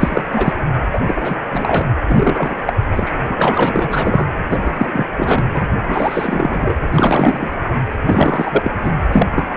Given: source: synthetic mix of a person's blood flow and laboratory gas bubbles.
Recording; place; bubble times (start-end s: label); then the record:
Doppler ultrasound of blood flow; precordium
0.00-0.24 s: bubbles
0.32-0.54 s: bubbles
0.92-0.99 s: bubbles
1.06-1.37 s: bubbles
1.52-1.85 s: bubbles
2.09-2.56 s: bubbles
2.67-2.73 s: bubbles
2.91-3.12 s: bubbles
3.29-4.26 s: bubbles
4.50-5.05 s: bubbles
5.17-5.43 s: bubbles
5.54-5.67 s: bubbles
5.87-6.75 s: bubbles
6.92-7.54 s: bubbles
8.06-8.71 s: bubbles
8.83-8.93 s: bubbles
9.12-9.27 s: bubbles
9.35-9.46 s: bubbles
9.55-9.57 s: bubbles
From the record:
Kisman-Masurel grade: 343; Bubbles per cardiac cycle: rolling drumbeat, 9 or more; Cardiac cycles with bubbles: 100%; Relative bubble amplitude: loud (0.450 to 0.775); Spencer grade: 3 (all of the cardiac periods contain showers or single bubble signals, but not dominating or overriding the cardiac motion signals); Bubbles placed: anywhere in the cardiac cycle